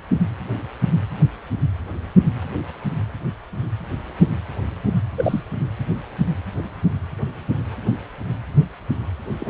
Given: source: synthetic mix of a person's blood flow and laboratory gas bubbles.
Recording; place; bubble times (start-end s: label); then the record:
Doppler ultrasound of blood flow; precordium
5.17-5.42 s: bubbles
9.39-9.49 s: bubbles
From the record:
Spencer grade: 2 (many but less than half of the cardiac periods contain bubble signals, singularly or in groups); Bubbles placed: anywhere in the cardiac cycle